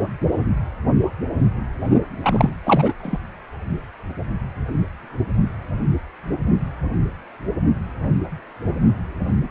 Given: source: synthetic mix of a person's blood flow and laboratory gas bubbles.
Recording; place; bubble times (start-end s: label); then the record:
Doppler ultrasound of blood flow; precordium
2.23-2.50 s: bubbles
2.64-2.93 s: bubbles
3.02-3.19 s: bubbles
From the record:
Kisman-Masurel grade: 223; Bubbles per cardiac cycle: several, 3 to 8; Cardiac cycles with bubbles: 10 to 50%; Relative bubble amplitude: loud (0.450 to 0.775); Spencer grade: 2 (many but less than half of the cardiac periods contain bubble signals, singularly or in groups); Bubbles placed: anywhere in the cardiac cycle